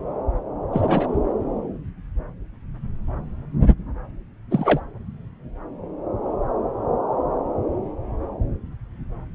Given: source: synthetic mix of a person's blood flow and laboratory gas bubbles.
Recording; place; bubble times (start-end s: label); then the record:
Doppler ultrasound of blood flow; subclavian vein
0.73-1.17 s: bubbles
4.50-4.80 s: bubbles
From the record:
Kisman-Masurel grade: 212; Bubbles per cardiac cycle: several, 3 to 8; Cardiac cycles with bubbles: 1 to 10%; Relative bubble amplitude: moderate (0.250 to 0.450); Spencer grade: 1 (occasional bubble signal discernible with the cardiac motion signal, with majority of cardiac periods free of bubbles); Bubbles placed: anywhere in the cardiac cycle